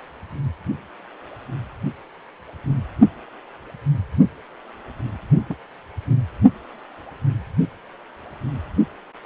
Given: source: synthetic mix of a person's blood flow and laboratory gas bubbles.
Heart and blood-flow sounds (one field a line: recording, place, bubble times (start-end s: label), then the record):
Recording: Doppler ultrasound of blood flow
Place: precordium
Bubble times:
5.49-5.55 s: bubbles
From the record:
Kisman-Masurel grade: 113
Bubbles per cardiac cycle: 1 to 2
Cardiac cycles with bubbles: 1 to 10%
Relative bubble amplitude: loud (0.450 to 0.775)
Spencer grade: 1 (occasional bubble signal discernible with the cardiac motion signal, with majority of cardiac periods free of bubbles)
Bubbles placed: only in the low amplitude regions of the cardiac cycle